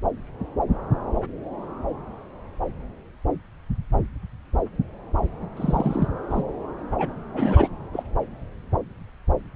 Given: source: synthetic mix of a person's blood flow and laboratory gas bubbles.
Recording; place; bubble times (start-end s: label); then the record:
Doppler ultrasound of blood flow; subclavian vein
5.57-6.08 s: bubbles
6.29-6.43 s: bubbles
6.98-7.13 s: bubbles
7.33-7.67 s: bubbles
7.92-8.03 s: bubbles
From the record:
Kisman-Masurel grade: 222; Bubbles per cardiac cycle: several, 3 to 8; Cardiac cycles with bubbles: 10 to 50%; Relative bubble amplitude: moderate (0.250 to 0.450); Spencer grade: 2 (many but less than half of the cardiac periods contain bubble signals, singularly or in groups); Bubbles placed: anywhere in the cardiac cycle